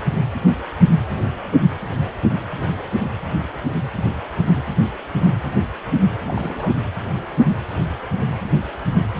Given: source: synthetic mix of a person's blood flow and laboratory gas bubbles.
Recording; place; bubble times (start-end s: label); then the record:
Doppler ultrasound of blood flow; precordium
6.25-6.75 s: bubbles
From the record:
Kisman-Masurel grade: 211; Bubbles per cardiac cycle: several, 3 to 8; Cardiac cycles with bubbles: 1 to 10%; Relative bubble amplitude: barely perceptible (0.100 to 0.250); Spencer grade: 1 (occasional bubble signal discernible with the cardiac motion signal, with majority of cardiac periods free of bubbles); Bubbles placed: anywhere in the cardiac cycle